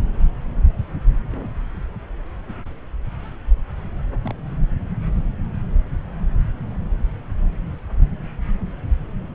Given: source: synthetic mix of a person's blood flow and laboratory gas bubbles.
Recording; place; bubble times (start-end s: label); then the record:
Doppler ultrasound of blood flow; subclavian vein
1.20-1.50 s: bubbles
4.23-4.33 s: bubbles
4.49-4.56 s: bubbles
From the record:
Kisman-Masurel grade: 121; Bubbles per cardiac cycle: 1 to 2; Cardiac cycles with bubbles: 10 to 50%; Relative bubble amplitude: barely perceptible (0.100 to 0.250); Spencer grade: 2 (many but less than half of the cardiac periods contain bubble signals, singularly or in groups); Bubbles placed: anywhere in the cardiac cycle